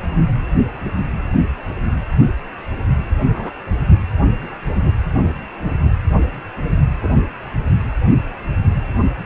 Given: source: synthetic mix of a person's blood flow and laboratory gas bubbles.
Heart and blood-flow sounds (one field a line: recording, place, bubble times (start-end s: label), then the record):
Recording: Doppler ultrasound of blood flow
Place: precordium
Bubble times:
3.33-3.50 s: bubbles
5.15-5.20 s: bubbles
7.01-7.08 s: bubbles
From the record:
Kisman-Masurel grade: 122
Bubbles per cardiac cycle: 1 to 2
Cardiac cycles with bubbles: 10 to 50%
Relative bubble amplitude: moderate (0.250 to 0.450)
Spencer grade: 2 (many but less than half of the cardiac periods contain bubble signals, singularly or in groups)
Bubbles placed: anywhere in the cardiac cycle